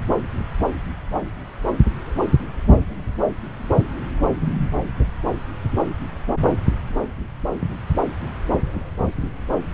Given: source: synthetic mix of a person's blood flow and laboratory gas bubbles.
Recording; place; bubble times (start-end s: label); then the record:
Doppler ultrasound of blood flow; subclavian vein
no bubbles
From the record:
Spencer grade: 0 (complete lack of bubble signals)